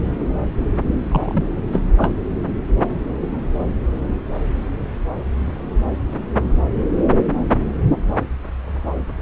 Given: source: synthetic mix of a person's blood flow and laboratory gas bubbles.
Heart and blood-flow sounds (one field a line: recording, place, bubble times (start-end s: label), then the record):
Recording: Doppler ultrasound of blood flow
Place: subclavian vein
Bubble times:
1.11-1.44 s: bubbles
1.73-1.84 s: bubbles
1.97-2.12 s: bubbles
From the record:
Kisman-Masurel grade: 213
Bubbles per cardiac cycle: several, 3 to 8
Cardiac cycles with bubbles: 1 to 10%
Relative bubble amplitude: loud (0.450 to 0.775)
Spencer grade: 1 (occasional bubble signal discernible with the cardiac motion signal, with majority of cardiac periods free of bubbles)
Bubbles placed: anywhere in the cardiac cycle